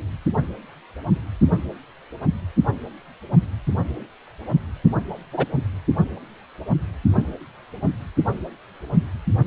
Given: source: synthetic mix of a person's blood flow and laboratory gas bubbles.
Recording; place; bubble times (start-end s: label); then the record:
Doppler ultrasound of blood flow; precordium
5.32-5.46 s: bubbles
From the record:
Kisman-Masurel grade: 113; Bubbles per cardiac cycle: 1 to 2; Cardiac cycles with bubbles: 1 to 10%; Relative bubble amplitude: loud (0.450 to 0.775); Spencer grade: 1 (occasional bubble signal discernible with the cardiac motion signal, with majority of cardiac periods free of bubbles); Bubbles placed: only in the low amplitude regions of the cardiac cycle